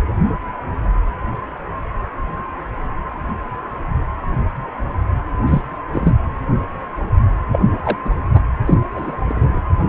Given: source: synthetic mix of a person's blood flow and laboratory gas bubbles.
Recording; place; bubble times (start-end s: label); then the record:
Doppler ultrasound of blood flow; precordium
5.46-5.62 s: bubbles
5.93-6.15 s: bubbles
7.51-7.82 s: bubbles
7.84-7.97 s: bubbles
8.05-8.10 s: bubbles
8.33-8.40 s: bubbles
8.66-8.74 s: bubbles
8.90-9.16 s: bubbles
9.29-9.60 s: bubbles
From the record:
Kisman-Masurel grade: 222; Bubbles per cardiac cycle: several, 3 to 8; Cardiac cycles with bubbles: 10 to 50%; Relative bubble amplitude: moderate (0.250 to 0.450); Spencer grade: 2 (many but less than half of the cardiac periods contain bubble signals, singularly or in groups); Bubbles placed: anywhere in the cardiac cycle